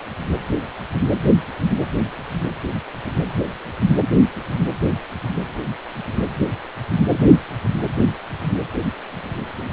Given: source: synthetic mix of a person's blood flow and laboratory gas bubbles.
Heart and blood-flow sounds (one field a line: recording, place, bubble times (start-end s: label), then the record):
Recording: Doppler ultrasound of blood flow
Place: precordium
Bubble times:
no bubbles
From the record:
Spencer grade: 0 (complete lack of bubble signals)